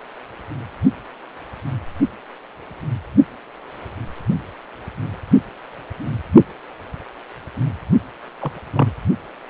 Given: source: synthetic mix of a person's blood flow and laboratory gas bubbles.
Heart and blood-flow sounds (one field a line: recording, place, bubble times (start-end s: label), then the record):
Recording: Doppler ultrasound of blood flow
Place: precordium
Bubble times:
8.39-8.60 s: bubbles
8.73-8.92 s: bubbles
From the record:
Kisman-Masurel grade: 112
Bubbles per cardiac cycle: 1 to 2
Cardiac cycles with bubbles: 1 to 10%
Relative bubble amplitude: moderate (0.250 to 0.450)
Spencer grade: 1 (occasional bubble signal discernible with the cardiac motion signal, with majority of cardiac periods free of bubbles)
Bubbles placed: only in the low amplitude regions of the cardiac cycle